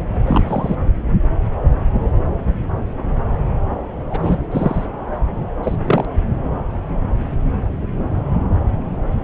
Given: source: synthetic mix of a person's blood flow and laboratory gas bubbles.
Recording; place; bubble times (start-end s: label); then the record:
Doppler ultrasound of blood flow; subclavian vein
0.26-0.76 s: bubbles
4.09-4.38 s: bubbles
4.51-4.86 s: bubbles
5.63-5.75 s: bubbles
5.86-6.05 s: bubbles
From the record:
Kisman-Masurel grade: 123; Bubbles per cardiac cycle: 1 to 2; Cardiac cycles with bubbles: 10 to 50%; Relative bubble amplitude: loud (0.450 to 0.775); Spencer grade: 2 (many but less than half of the cardiac periods contain bubble signals, singularly or in groups); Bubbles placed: anywhere in the cardiac cycle